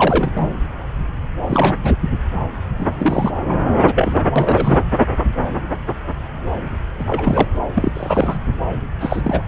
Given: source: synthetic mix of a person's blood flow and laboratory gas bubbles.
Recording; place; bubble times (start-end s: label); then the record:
Doppler ultrasound of blood flow; subclavian vein
0.00-0.53 s: bubbles
1.48-1.94 s: bubbles
2.77-3.34 s: bubbles
3.84-4.18 s: bubbles
4.35-4.80 s: bubbles
6.99-7.48 s: bubbles
7.74-8.38 s: bubbles
9.00-9.21 s: bubbles
9.24-9.42 s: bubbles
From the record:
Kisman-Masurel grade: 232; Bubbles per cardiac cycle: several, 3 to 8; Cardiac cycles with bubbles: 50 to 99%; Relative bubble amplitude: moderate (0.250 to 0.450); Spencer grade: 3 (all of the cardiac periods contain showers or single bubble signals, but not dominating or overriding the cardiac motion signals); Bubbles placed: anywhere in the cardiac cycle